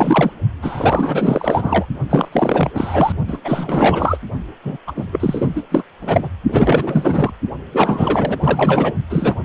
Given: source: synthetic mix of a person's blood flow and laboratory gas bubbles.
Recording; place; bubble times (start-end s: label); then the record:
Doppler ultrasound of blood flow; precordium
0.00-0.31 s: bubbles
0.62-1.85 s: bubbles
2.10-2.29 s: bubbles
2.31-2.70 s: bubbles
2.74-3.12 s: bubbles
3.28-3.38 s: bubbles
3.44-4.19 s: bubbles
4.65-4.77 s: bubbles
4.87-4.92 s: bubbles
4.96-5.06 s: bubbles
5.12-5.62 s: bubbles
5.71-5.83 s: bubbles
6.01-6.29 s: bubbles
6.48-7.30 s: bubbles
7.72-8.37 s: bubbles
8.40-8.94 s: bubbles
9.10-9.35 s: bubbles
From the record:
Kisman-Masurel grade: 444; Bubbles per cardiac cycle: continuous sound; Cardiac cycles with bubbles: 100%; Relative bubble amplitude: maximal (0.775 to 0.999); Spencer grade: 4 (maximum detectable bubble signal sounding continuously throughout systole and diastole of every cardiac period, and overriding the amplitude of the normal cardiac signals); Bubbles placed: only in the low amplitude regions of the cardiac cycle